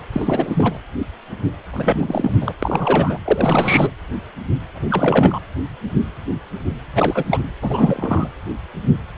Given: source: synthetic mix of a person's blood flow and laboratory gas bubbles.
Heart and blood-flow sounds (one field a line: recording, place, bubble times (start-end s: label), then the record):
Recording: Doppler ultrasound of blood flow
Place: precordium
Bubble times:
0.12-0.81 s: bubbles
1.73-2.36 s: bubbles
2.41-2.52 s: bubbles
2.62-3.18 s: bubbles
3.25-3.91 s: bubbles
4.75-5.40 s: bubbles
6.95-7.41 s: bubbles
7.61-8.27 s: bubbles
From the record:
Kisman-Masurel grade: 333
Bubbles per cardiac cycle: rolling drumbeat, 9 or more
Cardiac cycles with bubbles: 50 to 99%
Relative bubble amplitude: loud (0.450 to 0.775)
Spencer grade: 3 (all of the cardiac periods contain showers or single bubble signals, but not dominating or overriding the cardiac motion signals)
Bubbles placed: anywhere in the cardiac cycle